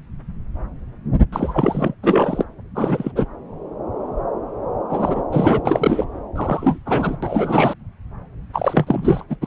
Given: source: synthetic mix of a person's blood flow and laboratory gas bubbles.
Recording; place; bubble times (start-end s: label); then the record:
Doppler ultrasound of blood flow; subclavian vein
1.32-1.94 s: bubbles
2.03-2.44 s: bubbles
2.75-3.12 s: bubbles
3.15-3.25 s: bubbles
4.90-5.23 s: bubbles
5.32-5.62 s: bubbles
5.65-6.05 s: bubbles
6.36-6.79 s: bubbles
6.86-7.16 s: bubbles
7.22-7.75 s: bubbles
8.53-9.23 s: bubbles
9.29-9.36 s: bubbles
9.41-9.47 s: bubbles
From the record:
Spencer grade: 3 (all of the cardiac periods contain showers or single bubble signals, but not dominating or overriding the cardiac motion signals); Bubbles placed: anywhere in the cardiac cycle